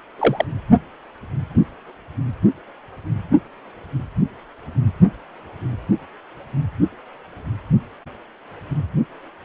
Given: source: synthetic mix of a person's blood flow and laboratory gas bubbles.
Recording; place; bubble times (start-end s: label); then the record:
Doppler ultrasound of blood flow; precordium
0.18-0.45 s: bubbles
From the record:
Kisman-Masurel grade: 113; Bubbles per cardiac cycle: 1 to 2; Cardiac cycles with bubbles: 1 to 10%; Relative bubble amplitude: loud (0.450 to 0.775); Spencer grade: 1 (occasional bubble signal discernible with the cardiac motion signal, with majority of cardiac periods free of bubbles); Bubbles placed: only in the low amplitude regions of the cardiac cycle